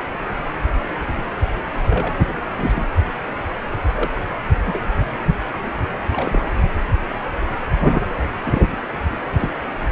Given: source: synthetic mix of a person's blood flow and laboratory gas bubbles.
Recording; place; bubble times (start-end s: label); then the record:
Doppler ultrasound of blood flow; precordium
1.41-1.48 s: bubbles
1.90-2.13 s: bubbles
2.18-2.25 s: bubbles
2.56-2.86 s: bubbles
3.95-4.08 s: bubbles
4.15-4.20 s: bubbles
4.66-4.79 s: bubbles
6.12-6.48 s: bubbles
7.92-8.04 s: bubbles
8.44-8.64 s: bubbles
9.39-9.51 s: bubbles
From the record:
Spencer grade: 2 (many but less than half of the cardiac periods contain bubble signals, singularly or in groups); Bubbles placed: anywhere in the cardiac cycle